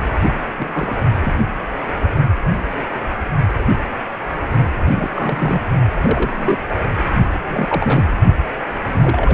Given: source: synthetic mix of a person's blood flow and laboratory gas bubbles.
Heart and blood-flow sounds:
Doppler ultrasound of blood flow; precordium
0.58-1.02 s: bubbles
1.20-1.45 s: bubbles
4.80-4.85 s: bubbles
4.89-5.61 s: bubbles
6.02-6.30 s: bubbles
6.34-6.58 s: bubbles
7.48-8.03 s: bubbles
8.60-8.67 s: bubbles
8.86-9.34 s: bubbles
From the record:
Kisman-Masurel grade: 232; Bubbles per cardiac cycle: several, 3 to 8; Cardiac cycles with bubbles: 50 to 99%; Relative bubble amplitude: moderate (0.250 to 0.450); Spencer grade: 3 (all of the cardiac periods contain showers or single bubble signals, but not dominating or overriding the cardiac motion signals); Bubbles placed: only in the low amplitude regions of the cardiac cycle

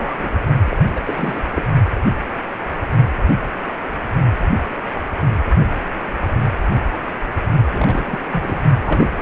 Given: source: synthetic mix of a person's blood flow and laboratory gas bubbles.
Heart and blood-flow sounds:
Doppler ultrasound of blood flow; precordium
0.00-0.15 s: bubbles
0.19-0.29 s: bubbles
0.66-0.77 s: bubbles
0.94-1.00 s: bubbles
1.07-1.42 s: bubbles
1.52-1.67 s: bubbles
7.72-8.20 s: bubbles
8.32-8.63 s: bubbles
8.85-9.22 s: bubbles
From the record:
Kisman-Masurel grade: 332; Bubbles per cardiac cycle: rolling drumbeat, 9 or more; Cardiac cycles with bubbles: 50 to 99%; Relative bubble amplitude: moderate (0.250 to 0.450); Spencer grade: 3 (all of the cardiac periods contain showers or single bubble signals, but not dominating or overriding the cardiac motion signals); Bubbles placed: only in the low amplitude regions of the cardiac cycle

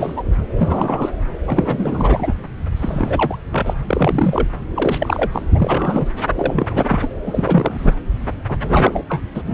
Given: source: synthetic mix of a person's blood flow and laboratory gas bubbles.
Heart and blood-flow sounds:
Doppler ultrasound of blood flow; subclavian vein
0.00-0.22 s: bubbles
0.57-1.10 s: bubbles
1.46-2.33 s: bubbles
2.76-3.38 s: bubbles
3.51-3.74 s: bubbles
3.86-4.47 s: bubbles
4.74-5.29 s: bubbles
5.32-5.42 s: bubbles
5.54-6.08 s: bubbles
6.35-6.67 s: bubbles
6.69-7.08 s: bubbles
7.25-7.93 s: bubbles
8.48-9.03 s: bubbles
9.09-9.22 s: bubbles
9.35-9.42 s: bubbles
9.47-9.54 s: bubbles
From the record:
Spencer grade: 3 (all of the cardiac periods contain showers or single bubble signals, but not dominating or overriding the cardiac motion signals); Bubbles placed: anywhere in the cardiac cycle

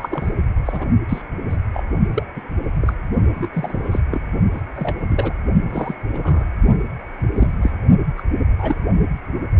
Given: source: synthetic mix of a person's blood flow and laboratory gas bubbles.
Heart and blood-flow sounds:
Doppler ultrasound of blood flow; precordium
0.00-0.32 s: bubbles
0.65-0.86 s: bubbles
1.08-1.22 s: bubbles
1.50-1.56 s: bubbles
1.73-1.83 s: bubbles
2.14-2.23 s: bubbles
2.35-2.42 s: bubbles
2.81-2.93 s: bubbles
3.35-3.49 s: bubbles
3.53-3.82 s: bubbles
3.85-4.00 s: bubbles
4.12-4.21 s: bubbles
4.53-4.61 s: bubbles
4.75-5.33 s: bubbles
5.69-5.94 s: bubbles
6.12-6.45 s: bubbles
7.34-7.51 s: bubbles
7.62-7.71 s: bubbles
8.16-8.22 s: bubbles
8.58-8.75 s: bubbles
From the record:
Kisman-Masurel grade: 242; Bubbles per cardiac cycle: several, 3 to 8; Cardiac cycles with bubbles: 100%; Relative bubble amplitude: moderate (0.250 to 0.450); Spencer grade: 3 (all of the cardiac periods contain showers or single bubble signals, but not dominating or overriding the cardiac motion signals); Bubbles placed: only in the low amplitude regions of the cardiac cycle

